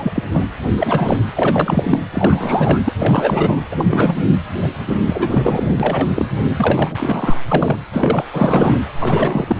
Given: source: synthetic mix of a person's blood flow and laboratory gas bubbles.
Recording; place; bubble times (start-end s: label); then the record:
Doppler ultrasound of blood flow; precordium
0.00-0.23 s: bubbles
0.31-0.44 s: bubbles
0.77-1.17 s: bubbles
1.36-1.99 s: bubbles
2.13-2.79 s: bubbles
2.85-2.92 s: bubbles
2.99-3.60 s: bubbles
3.71-4.24 s: bubbles
4.62-4.68 s: bubbles
4.87-4.96 s: bubbles
5.06-5.76 s: bubbles
5.79-6.24 s: bubbles
6.56-7.40 s: bubbles
7.48-7.76 s: bubbles
7.92-8.23 s: bubbles
8.33-8.78 s: bubbles
9.00-9.56 s: bubbles
From the record:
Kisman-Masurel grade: 343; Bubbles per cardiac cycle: rolling drumbeat, 9 or more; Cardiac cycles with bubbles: 100%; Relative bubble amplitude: loud (0.450 to 0.775); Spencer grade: 3 (all of the cardiac periods contain showers or single bubble signals, but not dominating or overriding the cardiac motion signals); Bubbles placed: anywhere in the cardiac cycle